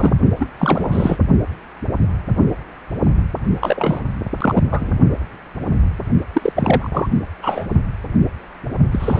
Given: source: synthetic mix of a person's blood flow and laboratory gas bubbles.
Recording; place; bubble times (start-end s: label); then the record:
Doppler ultrasound of blood flow; precordium
0.00-0.13 s: bubbles
0.39-0.47 s: bubbles
0.58-1.18 s: bubbles
3.61-4.00 s: bubbles
4.40-4.62 s: bubbles
4.71-4.92 s: bubbles
6.33-6.52 s: bubbles
6.55-7.11 s: bubbles
7.42-7.67 s: bubbles
8.91-9.20 s: bubbles
From the record:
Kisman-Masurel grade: 333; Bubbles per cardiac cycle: rolling drumbeat, 9 or more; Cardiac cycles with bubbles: 50 to 99%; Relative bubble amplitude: loud (0.450 to 0.775); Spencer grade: 3 (all of the cardiac periods contain showers or single bubble signals, but not dominating or overriding the cardiac motion signals); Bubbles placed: only in the low amplitude regions of the cardiac cycle